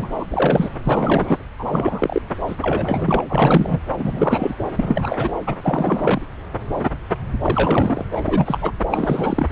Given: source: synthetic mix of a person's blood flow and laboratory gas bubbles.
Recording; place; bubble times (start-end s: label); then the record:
Doppler ultrasound of blood flow; subclavian vein
0.00-0.08 s: bubbles
0.18-0.70 s: bubbles
0.85-1.38 s: bubbles
1.59-2.22 s: bubbles
2.47-3.21 s: bubbles
3.29-3.79 s: bubbles
3.98-4.55 s: bubbles
4.75-5.33 s: bubbles
5.46-5.55 s: bubbles
5.63-6.21 s: bubbles
7.42-8.04 s: bubbles
8.12-8.59 s: bubbles
8.61-8.72 s: bubbles
8.91-9.47 s: bubbles
From the record:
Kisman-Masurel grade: 332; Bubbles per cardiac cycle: rolling drumbeat, 9 or more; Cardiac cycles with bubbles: 50 to 99%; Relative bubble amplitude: moderate (0.250 to 0.450); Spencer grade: 3 (all of the cardiac periods contain showers or single bubble signals, but not dominating or overriding the cardiac motion signals); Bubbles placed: anywhere in the cardiac cycle